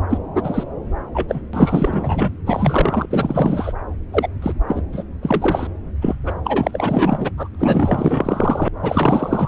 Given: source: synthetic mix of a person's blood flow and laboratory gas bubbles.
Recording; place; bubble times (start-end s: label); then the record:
Doppler ultrasound of blood flow; subclavian vein
0.09-0.17 s: bubbles
0.35-0.64 s: bubbles
1.14-1.42 s: bubbles
1.53-2.31 s: bubbles
2.46-3.06 s: bubbles
3.10-3.73 s: bubbles
4.12-4.29 s: bubbles
4.42-4.53 s: bubbles
4.68-4.83 s: bubbles
4.92-5.04 s: bubbles
5.22-5.67 s: bubbles
6.01-6.15 s: bubbles
6.25-6.33 s: bubbles
6.45-7.30 s: bubbles
7.37-7.49 s: bubbles
7.58-8.68 s: bubbles
8.81-9.48 s: bubbles
From the record:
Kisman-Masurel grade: 444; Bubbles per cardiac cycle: continuous sound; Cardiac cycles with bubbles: 100%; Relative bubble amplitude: maximal (0.775 to 0.999); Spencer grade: 4 (maximum detectable bubble signal sounding continuously throughout systole and diastole of every cardiac period, and overriding the amplitude of the normal cardiac signals); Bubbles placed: anywhere in the cardiac cycle